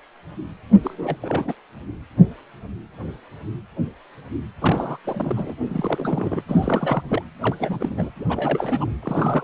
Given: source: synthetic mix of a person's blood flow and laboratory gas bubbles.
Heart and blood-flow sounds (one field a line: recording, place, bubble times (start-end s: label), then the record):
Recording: Doppler ultrasound of blood flow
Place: precordium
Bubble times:
0.83-1.17 s: bubbles
1.22-1.53 s: bubbles
4.61-4.97 s: bubbles
5.04-5.54 s: bubbles
5.70-6.42 s: bubbles
6.48-7.03 s: bubbles
7.08-7.22 s: bubbles
7.41-7.56 s: bubbles
7.59-8.10 s: bubbles
8.16-8.24 s: bubbles
8.29-8.90 s: bubbles
9.02-9.44 s: bubbles
From the record:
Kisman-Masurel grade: 332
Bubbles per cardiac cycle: rolling drumbeat, 9 or more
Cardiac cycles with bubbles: 50 to 99%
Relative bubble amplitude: moderate (0.250 to 0.450)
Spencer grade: 3 (all of the cardiac periods contain showers or single bubble signals, but not dominating or overriding the cardiac motion signals)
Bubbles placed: anywhere in the cardiac cycle